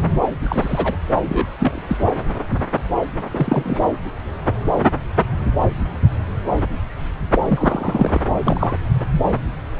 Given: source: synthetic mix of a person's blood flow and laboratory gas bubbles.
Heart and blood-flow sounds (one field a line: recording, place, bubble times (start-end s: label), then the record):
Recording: Doppler ultrasound of blood flow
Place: subclavian vein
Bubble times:
0.00-0.04 s: bubbles
0.22-0.29 s: bubbles
0.43-0.96 s: bubbles
1.16-1.47 s: bubbles
1.58-1.81 s: bubbles
1.88-1.97 s: bubbles
3.31-3.89 s: bubbles
7.48-8.21 s: bubbles
8.46-8.76 s: bubbles
From the record:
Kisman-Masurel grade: 232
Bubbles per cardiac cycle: several, 3 to 8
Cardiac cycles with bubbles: 50 to 99%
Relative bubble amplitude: moderate (0.250 to 0.450)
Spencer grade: 3 (all of the cardiac periods contain showers or single bubble signals, but not dominating or overriding the cardiac motion signals)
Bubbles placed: anywhere in the cardiac cycle